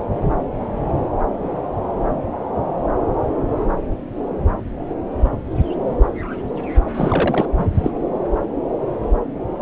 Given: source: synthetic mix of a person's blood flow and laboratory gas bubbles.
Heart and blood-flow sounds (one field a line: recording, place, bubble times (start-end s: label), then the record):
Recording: Doppler ultrasound of blood flow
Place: subclavian vein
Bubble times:
6.94-7.46 s: bubbles
7.58-7.64 s: bubbles
7.75-7.91 s: bubbles
From the record:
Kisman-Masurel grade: 212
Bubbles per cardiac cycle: several, 3 to 8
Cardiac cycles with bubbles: 1 to 10%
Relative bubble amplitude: moderate (0.250 to 0.450)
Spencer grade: 1 (occasional bubble signal discernible with the cardiac motion signal, with majority of cardiac periods free of bubbles)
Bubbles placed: anywhere in the cardiac cycle